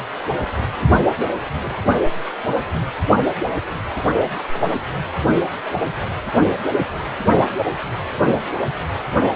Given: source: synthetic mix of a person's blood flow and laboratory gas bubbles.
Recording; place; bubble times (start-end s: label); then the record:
Doppler ultrasound of blood flow; precordium
1.61-1.77 s: bubbles
2.72-2.76 s: bubbles
4.52-4.68 s: bubbles
From the record:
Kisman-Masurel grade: 121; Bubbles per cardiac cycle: 1 to 2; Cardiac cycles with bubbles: 10 to 50%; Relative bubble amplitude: barely perceptible (0.100 to 0.250); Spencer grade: 2 (many but less than half of the cardiac periods contain bubble signals, singularly or in groups); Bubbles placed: only in the low amplitude regions of the cardiac cycle